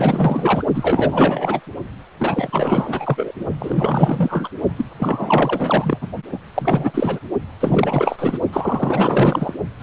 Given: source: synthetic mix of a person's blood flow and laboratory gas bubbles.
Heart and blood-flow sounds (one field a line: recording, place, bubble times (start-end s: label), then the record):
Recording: Doppler ultrasound of blood flow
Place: precordium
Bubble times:
0.00-0.65 s: bubbles
0.74-1.61 s: bubbles
2.19-3.32 s: bubbles
3.58-4.49 s: bubbles
4.76-4.85 s: bubbles
4.97-5.97 s: bubbles
6.01-6.08 s: bubbles
6.32-6.38 s: bubbles
6.54-6.91 s: bubbles
6.94-7.19 s: bubbles
7.60-8.16 s: bubbles
8.19-8.39 s: bubbles
8.53-9.54 s: bubbles
9.80-9.83 s: bubbles
From the record:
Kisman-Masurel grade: 444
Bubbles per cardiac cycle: continuous sound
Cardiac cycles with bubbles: 100%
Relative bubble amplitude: maximal (0.775 to 0.999)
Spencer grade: 4 (maximum detectable bubble signal sounding continuously throughout systole and diastole of every cardiac period, and overriding the amplitude of the normal cardiac signals)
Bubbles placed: only in the low amplitude regions of the cardiac cycle